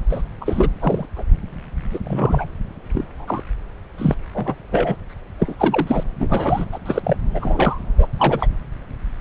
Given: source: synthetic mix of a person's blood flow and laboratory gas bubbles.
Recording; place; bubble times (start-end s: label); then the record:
Doppler ultrasound of blood flow; subclavian vein
0.09-0.22 s: bubbles
0.41-0.70 s: bubbles
0.80-1.06 s: bubbles
1.16-1.23 s: bubbles
1.91-1.99 s: bubbles
2.03-2.46 s: bubbles
2.94-3.03 s: bubbles
3.17-3.42 s: bubbles
3.98-4.16 s: bubbles
4.34-4.54 s: bubbles
4.72-4.96 s: bubbles
5.40-5.55 s: bubbles
5.58-6.04 s: bubbles
6.20-6.65 s: bubbles
6.72-6.79 s: bubbles
6.86-7.16 s: bubbles
7.34-7.80 s: bubbles
7.98-8.07 s: bubbles
8.15-8.47 s: bubbles
From the record:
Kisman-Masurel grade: 242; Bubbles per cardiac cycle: several, 3 to 8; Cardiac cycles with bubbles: 100%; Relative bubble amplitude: moderate (0.250 to 0.450); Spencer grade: 3 (all of the cardiac periods contain showers or single bubble signals, but not dominating or overriding the cardiac motion signals); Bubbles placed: anywhere in the cardiac cycle